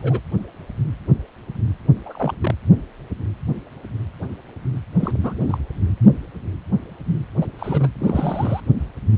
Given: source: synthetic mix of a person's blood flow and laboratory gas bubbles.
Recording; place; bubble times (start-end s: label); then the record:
Doppler ultrasound of blood flow; precordium
0.00-0.21 s: bubbles
2.06-2.34 s: bubbles
2.42-2.55 s: bubbles
4.99-5.11 s: bubbles
5.22-5.58 s: bubbles
7.41-7.46 s: bubbles
7.59-7.88 s: bubbles
8.00-8.60 s: bubbles
From the record:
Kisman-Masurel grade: 221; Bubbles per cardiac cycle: several, 3 to 8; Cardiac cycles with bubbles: 10 to 50%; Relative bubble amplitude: barely perceptible (0.100 to 0.250); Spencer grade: 2 (many but less than half of the cardiac periods contain bubble signals, singularly or in groups); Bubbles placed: anywhere in the cardiac cycle